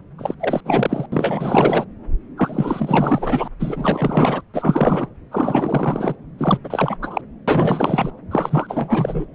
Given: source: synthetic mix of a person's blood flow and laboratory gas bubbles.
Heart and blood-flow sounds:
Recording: Doppler ultrasound of blood flow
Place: subclavian vein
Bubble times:
0.18-0.34 s: bubbles
0.40-0.60 s: bubbles
0.65-1.06 s: bubbles
1.12-1.85 s: bubbles
2.37-3.48 s: bubbles
3.59-4.41 s: bubbles
4.53-5.08 s: bubbles
5.31-6.15 s: bubbles
6.38-6.58 s: bubbles
6.64-6.96 s: bubbles
7.01-7.21 s: bubbles
7.47-8.11 s: bubbles
8.31-9.25 s: bubbles
From the record:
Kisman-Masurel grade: 444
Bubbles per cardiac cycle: continuous sound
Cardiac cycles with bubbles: 100%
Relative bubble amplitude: maximal (0.775 to 0.999)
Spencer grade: 4 (maximum detectable bubble signal sounding continuously throughout systole and diastole of every cardiac period, and overriding the amplitude of the normal cardiac signals)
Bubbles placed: anywhere in the cardiac cycle

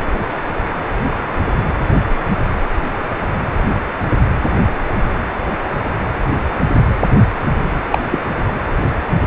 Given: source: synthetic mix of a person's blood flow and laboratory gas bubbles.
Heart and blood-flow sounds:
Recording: Doppler ultrasound of blood flow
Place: precordium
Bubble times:
7.91-7.99 s: bubbles
8.12-8.20 s: bubbles
From the record:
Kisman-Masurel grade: 113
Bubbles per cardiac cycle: 1 to 2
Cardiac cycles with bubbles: 1 to 10%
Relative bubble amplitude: loud (0.450 to 0.775)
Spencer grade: 1 (occasional bubble signal discernible with the cardiac motion signal, with majority of cardiac periods free of bubbles)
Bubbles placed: anywhere in the cardiac cycle

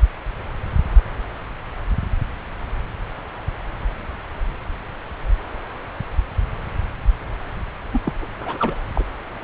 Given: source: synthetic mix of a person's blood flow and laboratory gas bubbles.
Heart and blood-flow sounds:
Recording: Doppler ultrasound of blood flow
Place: subclavian vein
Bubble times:
7.92-8.01 s: bubbles
8.04-8.13 s: bubbles
8.21-8.27 s: bubbles
8.40-8.76 s: bubbles
8.95-9.03 s: bubbles
From the record:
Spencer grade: 1 (occasional bubble signal discernible with the cardiac motion signal, with majority of cardiac periods free of bubbles)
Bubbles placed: anywhere in the cardiac cycle

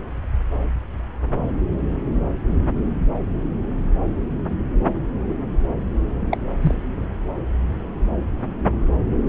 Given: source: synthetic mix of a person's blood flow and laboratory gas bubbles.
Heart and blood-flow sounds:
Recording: Doppler ultrasound of blood flow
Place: subclavian vein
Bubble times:
6.31-6.37 s: bubbles
6.62-6.75 s: bubbles
From the record:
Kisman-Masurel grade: 112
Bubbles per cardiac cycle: 1 to 2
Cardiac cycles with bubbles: 1 to 10%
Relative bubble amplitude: moderate (0.250 to 0.450)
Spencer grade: 1 (occasional bubble signal discernible with the cardiac motion signal, with majority of cardiac periods free of bubbles)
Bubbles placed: anywhere in the cardiac cycle

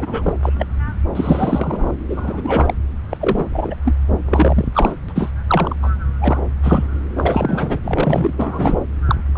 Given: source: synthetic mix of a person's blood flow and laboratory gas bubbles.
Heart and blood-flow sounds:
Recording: Doppler ultrasound of blood flow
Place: subclavian vein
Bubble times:
0.00-0.33 s: bubbles
0.42-0.52 s: bubbles
0.58-0.67 s: bubbles
1.15-1.91 s: bubbles
2.09-2.74 s: bubbles
3.10-3.17 s: bubbles
3.21-3.75 s: bubbles
3.85-3.96 s: bubbles
4.25-4.67 s: bubbles
4.73-4.92 s: bubbles
5.08-5.31 s: bubbles
5.47-5.76 s: bubbles
5.82-5.90 s: bubbles
6.19-6.41 s: bubbles
6.62-6.88 s: bubbles
7.16-7.79 s: bubbles
7.83-8.33 s: bubbles
8.36-8.79 s: bubbles
9.07-9.15 s: bubbles
9.33-9.38 s: bubbles
From the record:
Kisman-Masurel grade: 243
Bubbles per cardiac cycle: several, 3 to 8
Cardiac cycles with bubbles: 100%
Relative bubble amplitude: loud (0.450 to 0.775)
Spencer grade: 3 (all of the cardiac periods contain showers or single bubble signals, but not dominating or overriding the cardiac motion signals)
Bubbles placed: anywhere in the cardiac cycle

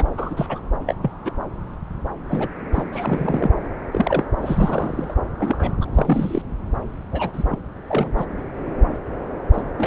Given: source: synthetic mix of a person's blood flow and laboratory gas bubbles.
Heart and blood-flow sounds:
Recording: Doppler ultrasound of blood flow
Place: subclavian vein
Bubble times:
0.00-0.05 s: bubbles
0.17-0.61 s: bubbles
0.86-0.94 s: bubbles
1.02-1.11 s: bubbles
1.25-1.32 s: bubbles
2.29-2.48 s: bubbles
2.73-2.83 s: bubbles
2.92-3.51 s: bubbles
3.92-4.25 s: bubbles
4.38-5.14 s: bubbles
5.39-5.76 s: bubbles
5.81-5.85 s: bubbles
5.93-6.42 s: bubbles
7.12-7.58 s: bubbles
7.87-8.12 s: bubbles
8.17-8.26 s: bubbles
9.53-9.63 s: bubbles
9.78-9.87 s: bubbles
From the record:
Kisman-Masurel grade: 232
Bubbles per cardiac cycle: several, 3 to 8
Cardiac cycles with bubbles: 50 to 99%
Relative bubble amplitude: moderate (0.250 to 0.450)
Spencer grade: 3 (all of the cardiac periods contain showers or single bubble signals, but not dominating or overriding the cardiac motion signals)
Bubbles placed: anywhere in the cardiac cycle

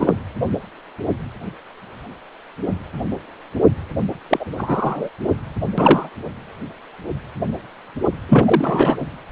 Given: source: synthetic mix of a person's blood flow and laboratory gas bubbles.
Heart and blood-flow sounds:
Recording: Doppler ultrasound of blood flow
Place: precordium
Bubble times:
0.00-0.13 s: bubbles
4.29-4.45 s: bubbles
4.57-5.09 s: bubbles
5.77-6.09 s: bubbles
8.29-8.96 s: bubbles
From the record:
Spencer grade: 2 (many but less than half of the cardiac periods contain bubble signals, singularly or in groups)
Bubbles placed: anywhere in the cardiac cycle

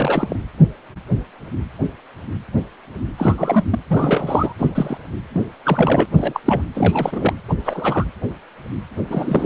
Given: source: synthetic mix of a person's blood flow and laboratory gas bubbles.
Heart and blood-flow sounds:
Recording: Doppler ultrasound of blood flow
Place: precordium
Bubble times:
0.00-0.36 s: bubbles
3.17-3.62 s: bubbles
3.70-3.79 s: bubbles
3.89-4.53 s: bubbles
4.58-4.70 s: bubbles
4.75-4.97 s: bubbles
5.33-5.43 s: bubbles
5.65-6.05 s: bubbles
6.10-6.40 s: bubbles
6.45-6.62 s: bubbles
6.75-7.33 s: bubbles
7.49-7.54 s: bubbles
7.65-8.04 s: bubbles
9.10-9.46 s: bubbles
From the record:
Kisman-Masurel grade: 232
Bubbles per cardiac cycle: several, 3 to 8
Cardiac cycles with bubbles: 50 to 99%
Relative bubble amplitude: moderate (0.250 to 0.450)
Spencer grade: 3 (all of the cardiac periods contain showers or single bubble signals, but not dominating or overriding the cardiac motion signals)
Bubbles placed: anywhere in the cardiac cycle

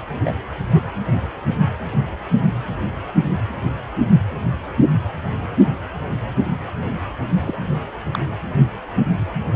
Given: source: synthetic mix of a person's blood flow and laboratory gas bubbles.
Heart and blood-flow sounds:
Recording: Doppler ultrasound of blood flow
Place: precordium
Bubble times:
0.24-0.33 s: bubbles
0.74-0.81 s: bubbles
7.40-7.58 s: bubbles
8.13-8.19 s: bubbles
From the record:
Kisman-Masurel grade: 121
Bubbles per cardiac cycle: 1 to 2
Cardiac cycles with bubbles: 10 to 50%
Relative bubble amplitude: barely perceptible (0.100 to 0.250)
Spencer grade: 2 (many but less than half of the cardiac periods contain bubble signals, singularly or in groups)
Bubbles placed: anywhere in the cardiac cycle

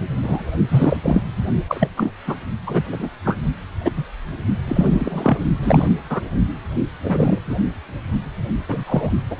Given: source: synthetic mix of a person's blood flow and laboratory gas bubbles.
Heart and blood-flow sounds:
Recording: Doppler ultrasound of blood flow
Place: precordium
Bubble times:
0.22-0.45 s: bubbles
0.68-0.98 s: bubbles
1.03-1.21 s: bubbles
1.67-1.89 s: bubbles
1.96-2.12 s: bubbles
2.27-2.35 s: bubbles
2.67-2.82 s: bubbles
2.92-3.10 s: bubbles
3.25-3.36 s: bubbles
3.83-3.92 s: bubbles
3.96-4.05 s: bubbles
4.66-5.38 s: bubbles
5.62-5.88 s: bubbles
6.09-6.21 s: bubbles
7.04-7.39 s: bubbles
7.46-7.56 s: bubbles
8.68-8.83 s: bubbles
8.86-9.11 s: bubbles
9.30-9.36 s: bubbles
From the record:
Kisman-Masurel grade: 233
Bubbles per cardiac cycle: several, 3 to 8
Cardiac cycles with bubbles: 50 to 99%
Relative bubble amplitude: loud (0.450 to 0.775)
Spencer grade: 3 (all of the cardiac periods contain showers or single bubble signals, but not dominating or overriding the cardiac motion signals)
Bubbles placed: only in the low amplitude regions of the cardiac cycle

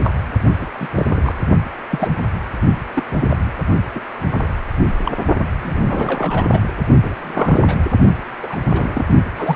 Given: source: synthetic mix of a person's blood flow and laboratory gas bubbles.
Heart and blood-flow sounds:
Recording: Doppler ultrasound of blood flow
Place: precordium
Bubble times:
0.04-0.13 s: bubbles
0.61-0.67 s: bubbles
0.79-0.88 s: bubbles
0.95-1.06 s: bubbles
1.09-1.32 s: bubbles
1.91-2.09 s: bubbles
2.93-3.04 s: bubbles
3.09-3.59 s: bubbles
3.94-4.00 s: bubbles
4.31-4.48 s: bubbles
5.05-5.12 s: bubbles
5.61-6.60 s: bubbles
7.02-7.15 s: bubbles
7.19-7.79 s: bubbles
8.42-8.56 s: bubbles
8.67-9.06 s: bubbles
9.37-9.56 s: bubbles
From the record:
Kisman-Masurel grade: 242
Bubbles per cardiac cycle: several, 3 to 8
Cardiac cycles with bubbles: 100%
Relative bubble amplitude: moderate (0.250 to 0.450)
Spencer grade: 3 (all of the cardiac periods contain showers or single bubble signals, but not dominating or overriding the cardiac motion signals)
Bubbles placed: only in the low amplitude regions of the cardiac cycle

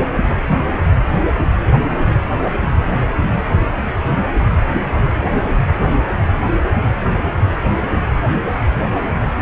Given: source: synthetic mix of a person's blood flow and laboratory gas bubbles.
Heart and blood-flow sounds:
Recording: Doppler ultrasound of blood flow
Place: precordium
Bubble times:
0.48-0.60 s: bubbles
From the record:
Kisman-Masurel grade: 112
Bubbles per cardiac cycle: 1 to 2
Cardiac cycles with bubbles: 1 to 10%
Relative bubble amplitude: moderate (0.250 to 0.450)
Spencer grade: 1 (occasional bubble signal discernible with the cardiac motion signal, with majority of cardiac periods free of bubbles)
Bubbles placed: anywhere in the cardiac cycle

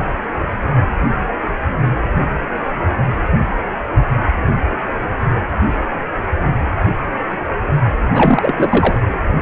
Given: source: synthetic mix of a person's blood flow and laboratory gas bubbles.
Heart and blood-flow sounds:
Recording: Doppler ultrasound of blood flow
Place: precordium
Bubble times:
8.12-8.54 s: bubbles
8.58-8.98 s: bubbles
From the record:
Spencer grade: 1 (occasional bubble signal discernible with the cardiac motion signal, with majority of cardiac periods free of bubbles)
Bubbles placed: anywhere in the cardiac cycle

